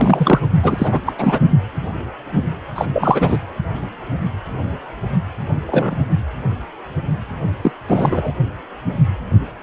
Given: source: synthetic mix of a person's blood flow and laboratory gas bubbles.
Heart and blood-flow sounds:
Doppler ultrasound of blood flow; precordium
0.00-0.40 s: bubbles
0.62-1.00 s: bubbles
1.06-1.12 s: bubbles
1.18-1.39 s: bubbles
2.75-2.86 s: bubbles
2.92-3.38 s: bubbles
5.67-6.04 s: bubbles
7.62-7.71 s: bubbles
7.88-8.34 s: bubbles
From the record:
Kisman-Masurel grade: 223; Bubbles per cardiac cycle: several, 3 to 8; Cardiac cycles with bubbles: 10 to 50%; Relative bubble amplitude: loud (0.450 to 0.775); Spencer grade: 2 (many but less than half of the cardiac periods contain bubble signals, singularly or in groups); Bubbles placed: only in the low amplitude regions of the cardiac cycle

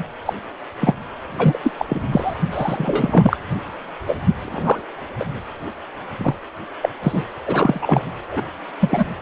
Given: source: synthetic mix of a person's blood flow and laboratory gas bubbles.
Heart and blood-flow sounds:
Doppler ultrasound of blood flow; precordium
0.25-0.33 s: bubbles
0.79-0.94 s: bubbles
1.36-1.58 s: bubbles
1.63-1.72 s: bubbles
1.77-1.85 s: bubbles
1.89-2.00 s: bubbles
2.12-2.34 s: bubbles
2.51-3.37 s: bubbles
4.07-4.16 s: bubbles
4.41-4.84 s: bubbles
5.19-5.25 s: bubbles
6.19-6.33 s: bubbles
6.81-6.89 s: bubbles
7.02-7.24 s: bubbles
7.38-7.40 s: bubbles
7.46-8.07 s: bubbles
8.32-8.41 s: bubbles
8.80-9.04 s: bubbles
From the record:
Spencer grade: 3 (all of the cardiac periods contain showers or single bubble signals, but not dominating or overriding the cardiac motion signals); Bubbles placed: anywhere in the cardiac cycle

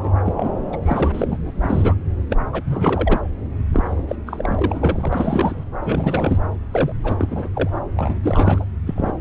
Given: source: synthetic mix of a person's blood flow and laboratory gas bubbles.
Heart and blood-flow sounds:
Doppler ultrasound of blood flow; subclavian vein
0.04-0.11 s: bubbles
0.25-0.77 s: bubbles
0.83-1.51 s: bubbles
1.61-1.95 s: bubbles
2.30-2.37 s: bubbles
2.52-3.22 s: bubbles
3.72-4.04 s: bubbles
4.08-4.16 s: bubbles
4.26-5.64 s: bubbles
5.82-6.38 s: bubbles
6.72-6.92 s: bubbles
7.04-7.49 s: bubbles
7.54-7.70 s: bubbles
7.96-8.64 s: bubbles
8.86-9.13 s: bubbles
From the record:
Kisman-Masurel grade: 342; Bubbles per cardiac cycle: rolling drumbeat, 9 or more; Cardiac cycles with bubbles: 100%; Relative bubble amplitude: moderate (0.250 to 0.450); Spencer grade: 3 (all of the cardiac periods contain showers or single bubble signals, but not dominating or overriding the cardiac motion signals); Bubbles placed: anywhere in the cardiac cycle

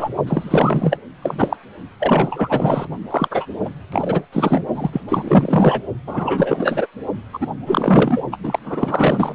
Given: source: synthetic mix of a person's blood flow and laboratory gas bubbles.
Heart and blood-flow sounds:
Doppler ultrasound of blood flow; precordium
0.00-0.09 s: bubbles
0.26-0.98 s: bubbles
1.22-1.56 s: bubbles
2.00-2.88 s: bubbles
3.10-3.46 s: bubbles
3.65-3.69 s: bubbles
3.92-4.24 s: bubbles
4.31-4.65 s: bubbles
4.74-5.01 s: bubbles
5.09-5.82 s: bubbles
6.07-6.87 s: bubbles
7.33-7.47 s: bubbles
7.66-8.21 s: bubbles
8.32-8.37 s: bubbles
8.43-8.59 s: bubbles
8.65-9.35 s: bubbles
From the record:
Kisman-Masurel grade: 444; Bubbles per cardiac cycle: continuous sound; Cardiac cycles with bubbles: 100%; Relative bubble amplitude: maximal (0.775 to 0.999); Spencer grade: 4 (maximum detectable bubble signal sounding continuously throughout systole and diastole of every cardiac period, and overriding the amplitude of the normal cardiac signals); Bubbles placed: only in the low amplitude regions of the cardiac cycle

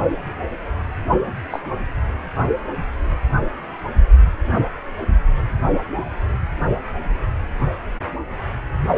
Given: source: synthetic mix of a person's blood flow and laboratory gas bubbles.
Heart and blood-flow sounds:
Doppler ultrasound of blood flow; precordium
1.50-1.59 s: bubbles
From the record:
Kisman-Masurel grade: 112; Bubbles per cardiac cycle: 1 to 2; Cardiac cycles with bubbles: 1 to 10%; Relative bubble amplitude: moderate (0.250 to 0.450); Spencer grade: 1 (occasional bubble signal discernible with the cardiac motion signal, with majority of cardiac periods free of bubbles); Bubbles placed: only in the low amplitude regions of the cardiac cycle

